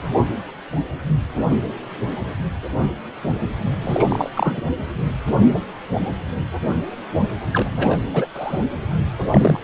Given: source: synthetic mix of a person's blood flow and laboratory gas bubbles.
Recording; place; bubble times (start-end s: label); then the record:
Doppler ultrasound of blood flow; precordium
3.82-4.30 s: bubbles
4.34-4.61 s: bubbles
7.53-7.97 s: bubbles
8.13-8.27 s: bubbles
8.34-8.59 s: bubbles
9.31-9.60 s: bubbles
From the record:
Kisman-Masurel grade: 223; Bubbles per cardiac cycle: several, 3 to 8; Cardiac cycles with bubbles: 10 to 50%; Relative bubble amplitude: loud (0.450 to 0.775); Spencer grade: 2 (many but less than half of the cardiac periods contain bubble signals, singularly or in groups); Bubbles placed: anywhere in the cardiac cycle